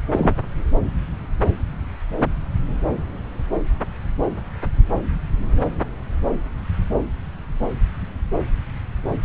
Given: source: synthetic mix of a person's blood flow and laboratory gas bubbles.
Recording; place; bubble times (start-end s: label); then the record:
Doppler ultrasound of blood flow; subclavian vein
0.12-0.34 s: bubbles
From the record:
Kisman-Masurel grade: 113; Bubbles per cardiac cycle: 1 to 2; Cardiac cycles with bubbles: 1 to 10%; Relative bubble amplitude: loud (0.450 to 0.775); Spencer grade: 1 (occasional bubble signal discernible with the cardiac motion signal, with majority of cardiac periods free of bubbles); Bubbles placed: anywhere in the cardiac cycle